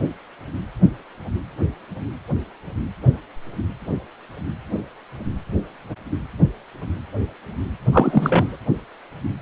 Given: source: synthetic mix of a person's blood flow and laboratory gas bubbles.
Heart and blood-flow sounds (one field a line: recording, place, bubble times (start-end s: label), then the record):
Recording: Doppler ultrasound of blood flow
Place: precordium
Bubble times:
7.92-8.56 s: bubbles
From the record:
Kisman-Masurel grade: 213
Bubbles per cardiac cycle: several, 3 to 8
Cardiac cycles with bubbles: 1 to 10%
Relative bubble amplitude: loud (0.450 to 0.775)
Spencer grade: 1 (occasional bubble signal discernible with the cardiac motion signal, with majority of cardiac periods free of bubbles)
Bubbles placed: anywhere in the cardiac cycle